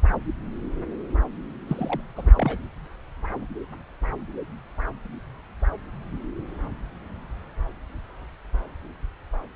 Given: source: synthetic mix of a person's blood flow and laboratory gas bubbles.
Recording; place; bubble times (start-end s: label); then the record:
Doppler ultrasound of blood flow; subclavian vein
1.68-2.01 s: bubbles
2.16-2.31 s: bubbles
2.36-2.57 s: bubbles
From the record:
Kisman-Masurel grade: 221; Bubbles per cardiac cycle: several, 3 to 8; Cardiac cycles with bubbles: 10 to 50%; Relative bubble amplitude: barely perceptible (0.100 to 0.250); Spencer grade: 2 (many but less than half of the cardiac periods contain bubble signals, singularly or in groups); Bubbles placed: anywhere in the cardiac cycle